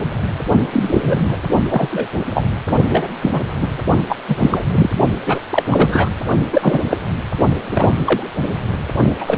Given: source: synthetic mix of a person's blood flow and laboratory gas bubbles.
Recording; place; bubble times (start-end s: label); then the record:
Doppler ultrasound of blood flow; precordium
0.72-1.37 s: bubbles
1.69-2.08 s: bubbles
2.34-2.45 s: bubbles
2.89-3.08 s: bubbles
3.21-3.48 s: bubbles
3.62-3.67 s: bubbles
4.09-4.16 s: bubbles
4.28-4.62 s: bubbles
4.72-4.90 s: bubbles
5.25-5.40 s: bubbles
5.50-5.64 s: bubbles
5.71-6.09 s: bubbles
6.53-6.80 s: bubbles
6.89-6.97 s: bubbles
7.70-7.89 s: bubbles
8.04-8.23 s: bubbles
9.19-9.38 s: bubbles
From the record:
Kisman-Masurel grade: 233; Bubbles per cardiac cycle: several, 3 to 8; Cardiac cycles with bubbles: 50 to 99%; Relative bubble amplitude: loud (0.450 to 0.775); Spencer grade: 3 (all of the cardiac periods contain showers or single bubble signals, but not dominating or overriding the cardiac motion signals); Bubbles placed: only in the low amplitude regions of the cardiac cycle